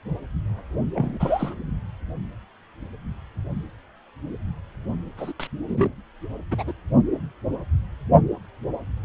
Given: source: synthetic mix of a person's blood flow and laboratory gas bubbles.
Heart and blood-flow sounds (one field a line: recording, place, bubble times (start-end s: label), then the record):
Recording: Doppler ultrasound of blood flow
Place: precordium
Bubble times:
0.93-1.54 s: bubbles
5.17-5.33 s: bubbles
5.39-5.47 s: bubbles
5.67-5.89 s: bubbles
6.51-6.63 s: bubbles
6.67-6.72 s: bubbles
From the record:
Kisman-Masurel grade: 232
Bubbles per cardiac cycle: several, 3 to 8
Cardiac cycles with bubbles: 50 to 99%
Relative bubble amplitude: moderate (0.250 to 0.450)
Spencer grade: 3 (all of the cardiac periods contain showers or single bubble signals, but not dominating or overriding the cardiac motion signals)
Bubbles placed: only in the low amplitude regions of the cardiac cycle